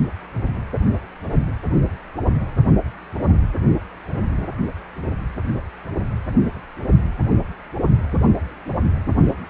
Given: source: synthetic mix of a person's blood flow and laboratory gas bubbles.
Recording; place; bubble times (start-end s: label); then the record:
Doppler ultrasound of blood flow; precordium
no bubbles
From the record:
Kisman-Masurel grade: 000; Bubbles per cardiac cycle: 0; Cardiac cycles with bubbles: 0%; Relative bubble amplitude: no bubbles discernible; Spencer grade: 0 (complete lack of bubble signals)